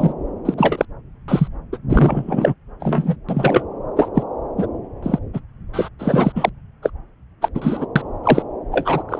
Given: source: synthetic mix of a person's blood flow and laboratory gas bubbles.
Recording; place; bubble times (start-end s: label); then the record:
Doppler ultrasound of blood flow; subclavian vein
0.00-0.13 s: bubbles
0.45-0.54 s: bubbles
0.57-0.85 s: bubbles
1.28-1.48 s: bubbles
1.72-1.78 s: bubbles
1.89-2.54 s: bubbles
2.79-3.17 s: bubbles
3.29-3.64 s: bubbles
3.96-4.09 s: bubbles
4.15-4.23 s: bubbles
4.58-4.67 s: bubbles
5.03-5.19 s: bubbles
5.33-5.40 s: bubbles
5.73-5.88 s: bubbles
5.99-6.32 s: bubbles
6.35-6.50 s: bubbles
6.82-6.90 s: bubbles
7.42-7.49 s: bubbles
7.54-7.86 s: bubbles
7.96-8.02 s: bubbles
8.23-8.42 s: bubbles
8.71-9.03 s: bubbles
9.08-9.20 s: bubbles
From the record:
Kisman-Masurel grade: 233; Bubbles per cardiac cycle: several, 3 to 8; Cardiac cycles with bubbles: 50 to 99%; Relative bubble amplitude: loud (0.450 to 0.775); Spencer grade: 3 (all of the cardiac periods contain showers or single bubble signals, but not dominating or overriding the cardiac motion signals); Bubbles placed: anywhere in the cardiac cycle